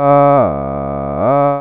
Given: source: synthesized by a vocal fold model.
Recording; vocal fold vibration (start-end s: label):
sustained vowel that changes in the middle
0.00-0.34 s: 141.7 Hz, open quotient 0.45
0.54-1.14 s: 69.6 Hz, open quotient 0.28
1.34-1.61 s: 141.7 Hz, open quotient 0.45